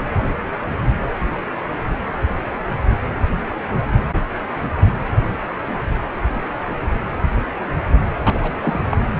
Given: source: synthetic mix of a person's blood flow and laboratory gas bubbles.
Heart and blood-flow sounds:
Doppler ultrasound of blood flow; precordium
8.22-8.54 s: bubbles
8.57-8.98 s: bubbles
From the record:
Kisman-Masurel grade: 212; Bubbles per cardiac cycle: several, 3 to 8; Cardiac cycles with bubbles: 1 to 10%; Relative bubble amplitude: moderate (0.250 to 0.450); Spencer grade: 1 (occasional bubble signal discernible with the cardiac motion signal, with majority of cardiac periods free of bubbles); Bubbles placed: anywhere in the cardiac cycle

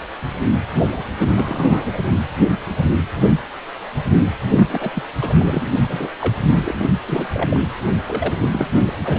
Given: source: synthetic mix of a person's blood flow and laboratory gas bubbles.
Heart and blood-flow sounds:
Doppler ultrasound of blood flow; precordium
0.91-1.02 s: bubbles
1.20-2.11 s: bubbles
4.46-5.03 s: bubbles
5.21-5.67 s: bubbles
5.72-6.08 s: bubbles
6.21-6.34 s: bubbles
6.47-6.89 s: bubbles
7.07-7.26 s: bubbles
7.33-7.68 s: bubbles
8.07-8.34 s: bubbles
8.40-8.68 s: bubbles
8.76-8.81 s: bubbles
8.87-8.91 s: bubbles
9.04-9.19 s: bubbles
From the record:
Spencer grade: 3 (all of the cardiac periods contain showers or single bubble signals, but not dominating or overriding the cardiac motion signals); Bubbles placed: anywhere in the cardiac cycle

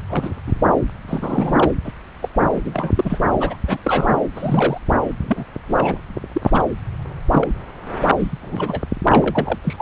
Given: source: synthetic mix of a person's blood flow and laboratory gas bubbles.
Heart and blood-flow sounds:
Doppler ultrasound of blood flow; subclavian vein
0.07-0.42 s: bubbles
0.46-0.53 s: bubbles
1.08-1.71 s: bubbles
1.84-1.92 s: bubbles
2.22-2.28 s: bubbles
2.33-2.61 s: bubbles
2.64-2.92 s: bubbles
2.96-3.19 s: bubbles
3.40-3.56 s: bubbles
3.68-3.77 s: bubbles
3.84-4.09 s: bubbles
4.35-4.78 s: bubbles
5.21-5.45 s: bubbles
5.69-5.98 s: bubbles
6.33-6.62 s: bubbles
7.32-7.48 s: bubbles
8.18-8.38 s: bubbles
8.41-8.80 s: bubbles
9.08-9.58 s: bubbles
9.63-9.82 s: bubbles
From the record:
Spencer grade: 3 (all of the cardiac periods contain showers or single bubble signals, but not dominating or overriding the cardiac motion signals); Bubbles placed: anywhere in the cardiac cycle

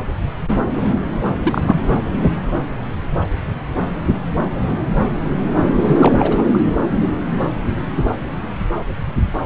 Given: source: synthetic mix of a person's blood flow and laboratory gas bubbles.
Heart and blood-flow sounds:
Doppler ultrasound of blood flow; subclavian vein
1.43-1.86 s: bubbles
1.90-2.02 s: bubbles
5.81-6.44 s: bubbles
6.54-6.58 s: bubbles
From the record:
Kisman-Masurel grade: 212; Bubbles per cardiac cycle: several, 3 to 8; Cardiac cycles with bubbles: 1 to 10%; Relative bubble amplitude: moderate (0.250 to 0.450); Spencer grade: 1 (occasional bubble signal discernible with the cardiac motion signal, with majority of cardiac periods free of bubbles); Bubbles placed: anywhere in the cardiac cycle

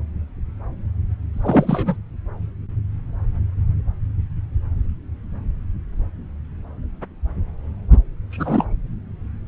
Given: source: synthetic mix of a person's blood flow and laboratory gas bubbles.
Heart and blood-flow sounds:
Doppler ultrasound of blood flow; subclavian vein
1.33-1.97 s: bubbles
8.30-8.64 s: bubbles
From the record:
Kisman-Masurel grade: 222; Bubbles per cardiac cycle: several, 3 to 8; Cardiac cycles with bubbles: 10 to 50%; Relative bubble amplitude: moderate (0.250 to 0.450); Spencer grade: 2 (many but less than half of the cardiac periods contain bubble signals, singularly or in groups); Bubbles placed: anywhere in the cardiac cycle

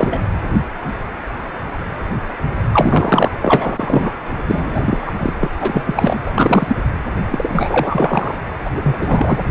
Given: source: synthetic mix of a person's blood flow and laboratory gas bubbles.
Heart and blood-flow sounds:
Doppler ultrasound of blood flow; precordium
0.00-0.27 s: bubbles
2.73-3.31 s: bubbles
3.42-4.11 s: bubbles
4.47-5.12 s: bubbles
5.19-5.33 s: bubbles
5.39-5.47 s: bubbles
5.56-6.23 s: bubbles
6.25-6.31 s: bubbles
6.38-6.76 s: bubbles
7.31-8.35 s: bubbles
8.64-8.71 s: bubbles
8.76-9.38 s: bubbles
From the record:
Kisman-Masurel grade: 333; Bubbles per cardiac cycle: rolling drumbeat, 9 or more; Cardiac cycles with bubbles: 50 to 99%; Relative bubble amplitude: loud (0.450 to 0.775); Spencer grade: 3 (all of the cardiac periods contain showers or single bubble signals, but not dominating or overriding the cardiac motion signals); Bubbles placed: anywhere in the cardiac cycle

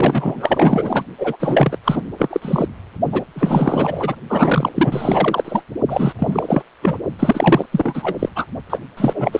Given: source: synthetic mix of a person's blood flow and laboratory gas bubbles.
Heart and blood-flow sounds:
Doppler ultrasound of blood flow; precordium
0.00-1.02 s: bubbles
1.18-1.36 s: bubbles
1.39-1.77 s: bubbles
1.84-2.02 s: bubbles
2.18-2.66 s: bubbles
3.12-3.23 s: bubbles
3.35-4.15 s: bubbles
4.29-4.72 s: bubbles
4.75-5.61 s: bubbles
5.88-6.12 s: bubbles
6.18-6.64 s: bubbles
6.82-6.97 s: bubbles
7.19-7.67 s: bubbles
7.71-8.15 s: bubbles
8.19-8.29 s: bubbles
8.36-8.46 s: bubbles
8.70-8.79 s: bubbles
8.97-9.40 s: bubbles
From the record:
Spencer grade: 4 (maximum detectable bubble signal sounding continuously throughout systole and diastole of every cardiac period, and overriding the amplitude of the normal cardiac signals); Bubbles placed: only in the low amplitude regions of the cardiac cycle

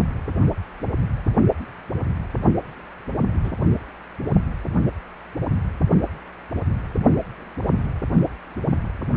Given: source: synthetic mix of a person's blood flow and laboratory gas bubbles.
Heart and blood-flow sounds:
Doppler ultrasound of blood flow; precordium
3.44-3.52 s: bubbles
From the record:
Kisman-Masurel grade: 111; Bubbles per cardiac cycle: 1 to 2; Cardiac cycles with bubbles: 1 to 10%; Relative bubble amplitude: barely perceptible (0.100 to 0.250); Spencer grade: 1 (occasional bubble signal discernible with the cardiac motion signal, with majority of cardiac periods free of bubbles); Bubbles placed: only in the low amplitude regions of the cardiac cycle

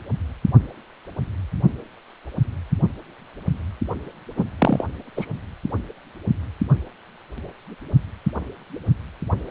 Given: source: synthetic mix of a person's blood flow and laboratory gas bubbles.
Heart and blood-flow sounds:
Doppler ultrasound of blood flow; precordium
4.37-4.44 s: bubbles
4.58-4.84 s: bubbles
5.17-5.25 s: bubbles
From the record:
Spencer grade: 1 (occasional bubble signal discernible with the cardiac motion signal, with majority of cardiac periods free of bubbles); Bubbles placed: only in the low amplitude regions of the cardiac cycle

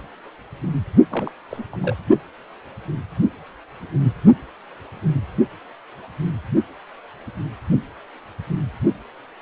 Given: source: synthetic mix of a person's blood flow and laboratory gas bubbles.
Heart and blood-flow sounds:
Doppler ultrasound of blood flow; precordium
1.11-1.31 s: bubbles
1.50-1.65 s: bubbles
1.72-1.76 s: bubbles
1.83-1.96 s: bubbles
From the record:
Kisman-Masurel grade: 211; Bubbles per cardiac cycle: several, 3 to 8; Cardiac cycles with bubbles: 1 to 10%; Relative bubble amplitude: barely perceptible (0.100 to 0.250); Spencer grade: 1 (occasional bubble signal discernible with the cardiac motion signal, with majority of cardiac periods free of bubbles); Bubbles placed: only in the low amplitude regions of the cardiac cycle

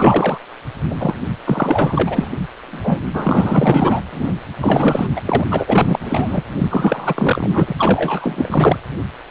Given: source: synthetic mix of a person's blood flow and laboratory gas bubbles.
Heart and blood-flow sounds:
Doppler ultrasound of blood flow; precordium
0.00-0.38 s: bubbles
0.90-0.96 s: bubbles
0.99-1.14 s: bubbles
1.45-2.30 s: bubbles
2.66-3.00 s: bubbles
3.14-4.02 s: bubbles
4.11-4.34 s: bubbles
4.60-5.06 s: bubbles
5.16-5.21 s: bubbles
5.26-5.44 s: bubbles
5.50-5.99 s: bubbles
6.02-6.44 s: bubbles
6.58-7.49 s: bubbles
7.53-7.74 s: bubbles
7.78-8.78 s: bubbles
From the record:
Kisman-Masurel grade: 444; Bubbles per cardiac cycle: continuous sound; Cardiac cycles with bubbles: 100%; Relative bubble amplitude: maximal (0.775 to 0.999); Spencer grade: 4 (maximum detectable bubble signal sounding continuously throughout systole and diastole of every cardiac period, and overriding the amplitude of the normal cardiac signals); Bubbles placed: anywhere in the cardiac cycle

